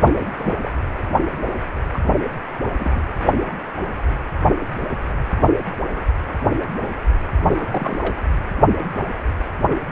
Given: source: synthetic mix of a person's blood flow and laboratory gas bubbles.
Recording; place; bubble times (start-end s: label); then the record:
Doppler ultrasound of blood flow; precordium
0.00-0.27 s: bubbles
0.36-0.53 s: bubbles
0.61-0.73 s: bubbles
1.93-2.00 s: bubbles
2.20-2.26 s: bubbles
2.78-3.01 s: bubbles
7.42-7.54 s: bubbles
7.56-8.14 s: bubbles
From the record:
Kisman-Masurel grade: 221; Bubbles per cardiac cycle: several, 3 to 8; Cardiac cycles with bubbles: 10 to 50%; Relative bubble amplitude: barely perceptible (0.100 to 0.250); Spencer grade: 2 (many but less than half of the cardiac periods contain bubble signals, singularly or in groups); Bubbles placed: anywhere in the cardiac cycle